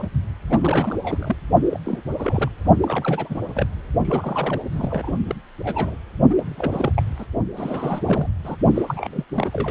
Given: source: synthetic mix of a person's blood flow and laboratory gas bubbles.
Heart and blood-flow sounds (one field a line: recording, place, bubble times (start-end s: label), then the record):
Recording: Doppler ultrasound of blood flow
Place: precordium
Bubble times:
0.00-0.08 s: bubbles
0.49-0.96 s: bubbles
1.03-1.36 s: bubbles
1.70-1.79 s: bubbles
1.84-1.99 s: bubbles
2.19-2.50 s: bubbles
2.80-3.39 s: bubbles
3.54-3.67 s: bubbles
4.04-4.61 s: bubbles
4.72-5.17 s: bubbles
5.27-5.35 s: bubbles
5.59-5.95 s: bubbles
6.29-6.92 s: bubbles
6.96-7.02 s: bubbles
7.18-7.25 s: bubbles
7.56-8.29 s: bubbles
8.44-8.56 s: bubbles
8.75-9.24 s: bubbles
9.35-9.71 s: bubbles
From the record:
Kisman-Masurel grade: 342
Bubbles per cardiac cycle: rolling drumbeat, 9 or more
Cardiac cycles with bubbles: 100%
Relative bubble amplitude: moderate (0.250 to 0.450)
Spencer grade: 3 (all of the cardiac periods contain showers or single bubble signals, but not dominating or overriding the cardiac motion signals)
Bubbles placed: only in the low amplitude regions of the cardiac cycle